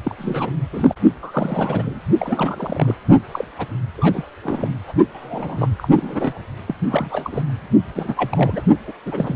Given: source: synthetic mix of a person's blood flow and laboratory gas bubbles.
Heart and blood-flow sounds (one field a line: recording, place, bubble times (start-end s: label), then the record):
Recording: Doppler ultrasound of blood flow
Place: precordium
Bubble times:
0.05-0.15 s: bubbles
0.18-0.51 s: bubbles
0.72-0.95 s: bubbles
1.22-2.00 s: bubbles
2.19-2.95 s: bubbles
3.31-3.45 s: bubbles
3.58-3.68 s: bubbles
3.97-4.23 s: bubbles
4.42-4.71 s: bubbles
4.88-4.92 s: bubbles
5.13-5.69 s: bubbles
5.77-5.88 s: bubbles
5.96-6.38 s: bubbles
6.66-6.75 s: bubbles
6.90-7.42 s: bubbles
7.95-8.62 s: bubbles
8.87-8.93 s: bubbles
9.05-9.36 s: bubbles
From the record:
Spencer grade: 3 (all of the cardiac periods contain showers or single bubble signals, but not dominating or overriding the cardiac motion signals)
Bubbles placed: only in the low amplitude regions of the cardiac cycle